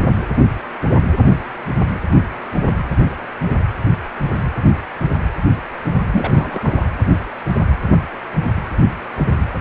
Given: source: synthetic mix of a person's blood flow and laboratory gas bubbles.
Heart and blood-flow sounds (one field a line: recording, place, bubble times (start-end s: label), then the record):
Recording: Doppler ultrasound of blood flow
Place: precordium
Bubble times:
6.12-6.86 s: bubbles
From the record:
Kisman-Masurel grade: 222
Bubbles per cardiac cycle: several, 3 to 8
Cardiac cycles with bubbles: 10 to 50%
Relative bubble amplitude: moderate (0.250 to 0.450)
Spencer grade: 2 (many but less than half of the cardiac periods contain bubble signals, singularly or in groups)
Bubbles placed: anywhere in the cardiac cycle